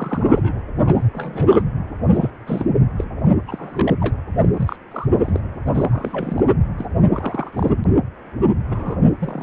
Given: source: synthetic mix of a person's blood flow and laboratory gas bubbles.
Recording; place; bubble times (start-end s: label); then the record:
Doppler ultrasound of blood flow; precordium
0.00-0.59 s: bubbles
0.85-1.08 s: bubbles
1.14-1.62 s: bubbles
2.12-2.31 s: bubbles
2.46-2.66 s: bubbles
2.98-3.04 s: bubbles
3.48-3.97 s: bubbles
4.00-4.16 s: bubbles
4.38-4.49 s: bubbles
4.54-4.76 s: bubbles
4.91-5.07 s: bubbles
5.19-5.41 s: bubbles
5.66-6.44 s: bubbles
6.78-6.86 s: bubbles
7.10-7.70 s: bubbles
8.68-9.01 s: bubbles
9.20-9.43 s: bubbles
From the record:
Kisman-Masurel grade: 242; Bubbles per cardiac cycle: several, 3 to 8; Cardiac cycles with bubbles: 100%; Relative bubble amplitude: moderate (0.250 to 0.450); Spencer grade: 3 (all of the cardiac periods contain showers or single bubble signals, but not dominating or overriding the cardiac motion signals); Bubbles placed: anywhere in the cardiac cycle